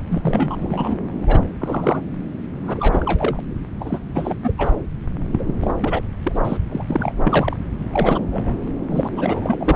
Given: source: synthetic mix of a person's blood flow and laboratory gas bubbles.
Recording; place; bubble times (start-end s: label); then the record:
Doppler ultrasound of blood flow; subclavian vein
0.10-0.96 s: bubbles
1.20-1.42 s: bubbles
1.60-2.02 s: bubbles
2.62-3.42 s: bubbles
3.81-3.99 s: bubbles
4.14-4.37 s: bubbles
4.43-4.52 s: bubbles
4.58-4.72 s: bubbles
5.32-5.55 s: bubbles
5.62-5.75 s: bubbles
5.80-6.01 s: bubbles
6.23-6.39 s: bubbles
6.44-6.58 s: bubbles
6.71-7.14 s: bubbles
7.24-7.57 s: bubbles
7.92-8.20 s: bubbles
8.31-8.56 s: bubbles
8.90-9.08 s: bubbles
9.16-9.76 s: bubbles
From the record:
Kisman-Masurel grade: 342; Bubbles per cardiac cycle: rolling drumbeat, 9 or more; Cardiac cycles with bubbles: 100%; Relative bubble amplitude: moderate (0.250 to 0.450); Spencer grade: 3 (all of the cardiac periods contain showers or single bubble signals, but not dominating or overriding the cardiac motion signals); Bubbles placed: anywhere in the cardiac cycle